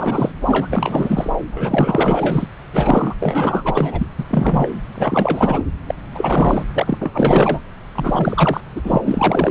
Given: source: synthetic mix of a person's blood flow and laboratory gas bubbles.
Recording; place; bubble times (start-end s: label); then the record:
Doppler ultrasound of blood flow; subclavian vein
0.00-0.32 s: bubbles
0.46-1.31 s: bubbles
1.51-2.46 s: bubbles
2.73-3.14 s: bubbles
3.20-4.06 s: bubbles
4.19-4.24 s: bubbles
4.28-4.69 s: bubbles
4.95-5.64 s: bubbles
5.87-5.95 s: bubbles
6.14-6.64 s: bubbles
6.74-7.60 s: bubbles
7.95-8.61 s: bubbles
8.75-9.02 s: bubbles
9.05-9.51 s: bubbles
From the record:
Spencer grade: 4 (maximum detectable bubble signal sounding continuously throughout systole and diastole of every cardiac period, and overriding the amplitude of the normal cardiac signals); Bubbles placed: anywhere in the cardiac cycle